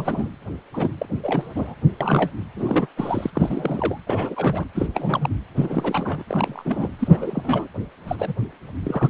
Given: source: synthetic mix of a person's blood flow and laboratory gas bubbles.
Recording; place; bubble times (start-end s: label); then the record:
Doppler ultrasound of blood flow; precordium
0.00-0.28 s: bubbles
0.74-0.92 s: bubbles
0.98-1.06 s: bubbles
1.23-1.75 s: bubbles
2.00-2.31 s: bubbles
2.56-2.87 s: bubbles
2.96-3.31 s: bubbles
3.35-3.98 s: bubbles
4.06-4.65 s: bubbles
4.74-4.86 s: bubbles
4.94-5.29 s: bubbles
5.55-6.23 s: bubbles
6.27-6.93 s: bubbles
6.98-7.68 s: bubbles
8.08-8.16 s: bubbles
8.19-8.34 s: bubbles
8.83-9.10 s: bubbles
From the record:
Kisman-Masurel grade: 342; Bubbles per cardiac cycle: rolling drumbeat, 9 or more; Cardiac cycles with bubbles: 100%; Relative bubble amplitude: moderate (0.250 to 0.450); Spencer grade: 3 (all of the cardiac periods contain showers or single bubble signals, but not dominating or overriding the cardiac motion signals); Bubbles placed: anywhere in the cardiac cycle